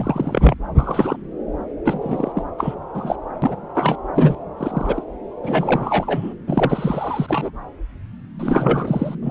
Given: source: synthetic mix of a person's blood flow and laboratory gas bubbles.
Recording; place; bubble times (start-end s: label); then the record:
Doppler ultrasound of blood flow; subclavian vein
0.00-0.55 s: bubbles
0.79-1.16 s: bubbles
1.84-2.33 s: bubbles
2.35-2.42 s: bubbles
2.58-2.75 s: bubbles
2.94-3.16 s: bubbles
3.42-3.57 s: bubbles
3.75-3.97 s: bubbles
4.14-4.35 s: bubbles
4.57-5.04 s: bubbles
5.43-6.34 s: bubbles
6.47-7.50 s: bubbles
8.39-9.15 s: bubbles
9.22-9.31 s: bubbles
From the record:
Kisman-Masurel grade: 342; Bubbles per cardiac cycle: rolling drumbeat, 9 or more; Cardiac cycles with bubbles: 100%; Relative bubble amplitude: moderate (0.250 to 0.450); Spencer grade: 3 (all of the cardiac periods contain showers or single bubble signals, but not dominating or overriding the cardiac motion signals); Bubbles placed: anywhere in the cardiac cycle